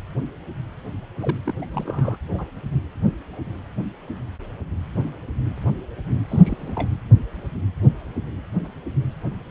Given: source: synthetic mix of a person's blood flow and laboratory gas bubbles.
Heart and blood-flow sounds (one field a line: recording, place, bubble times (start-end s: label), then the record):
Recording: Doppler ultrasound of blood flow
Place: precordium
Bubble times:
1.20-1.39 s: bubbles
1.45-1.54 s: bubbles
1.62-1.66 s: bubbles
1.71-1.83 s: bubbles
1.85-2.17 s: bubbles
2.33-2.46 s: bubbles
6.28-6.88 s: bubbles
From the record:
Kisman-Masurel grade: 221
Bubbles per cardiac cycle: several, 3 to 8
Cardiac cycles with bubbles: 10 to 50%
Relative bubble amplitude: barely perceptible (0.100 to 0.250)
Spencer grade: 2 (many but less than half of the cardiac periods contain bubble signals, singularly or in groups)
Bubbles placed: anywhere in the cardiac cycle